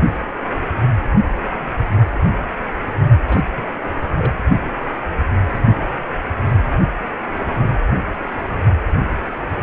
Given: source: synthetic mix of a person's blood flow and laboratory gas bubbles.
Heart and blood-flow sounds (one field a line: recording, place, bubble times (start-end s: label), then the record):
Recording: Doppler ultrasound of blood flow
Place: precordium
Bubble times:
3.27-3.41 s: bubbles
3.56-3.62 s: bubbles
4.17-4.33 s: bubbles
From the record:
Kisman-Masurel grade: 211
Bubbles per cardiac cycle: several, 3 to 8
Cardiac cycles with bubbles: 1 to 10%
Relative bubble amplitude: barely perceptible (0.100 to 0.250)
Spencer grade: 1 (occasional bubble signal discernible with the cardiac motion signal, with majority of cardiac periods free of bubbles)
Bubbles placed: anywhere in the cardiac cycle